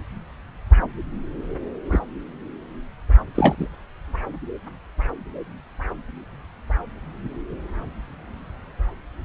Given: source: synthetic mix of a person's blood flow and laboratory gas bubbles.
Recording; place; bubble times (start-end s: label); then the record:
Doppler ultrasound of blood flow; subclavian vein
1.92-1.99 s: bubbles
3.34-3.67 s: bubbles
From the record:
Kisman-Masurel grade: 213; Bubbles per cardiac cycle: several, 3 to 8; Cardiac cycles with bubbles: 1 to 10%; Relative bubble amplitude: loud (0.450 to 0.775); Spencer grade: 1 (occasional bubble signal discernible with the cardiac motion signal, with majority of cardiac periods free of bubbles); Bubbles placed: anywhere in the cardiac cycle